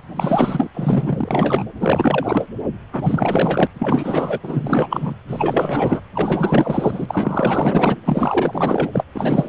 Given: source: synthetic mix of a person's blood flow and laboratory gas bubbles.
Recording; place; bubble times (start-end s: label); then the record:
Doppler ultrasound of blood flow; precordium
0.16-0.69 s: bubbles
0.73-1.64 s: bubbles
1.80-2.46 s: bubbles
2.92-3.67 s: bubbles
3.74-4.41 s: bubbles
4.43-5.15 s: bubbles
5.28-6.01 s: bubbles
6.14-7.97 s: bubbles
8.05-8.88 s: bubbles
8.93-9.04 s: bubbles
9.14-9.49 s: bubbles
From the record:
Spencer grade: 4 (maximum detectable bubble signal sounding continuously throughout systole and diastole of every cardiac period, and overriding the amplitude of the normal cardiac signals); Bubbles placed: anywhere in the cardiac cycle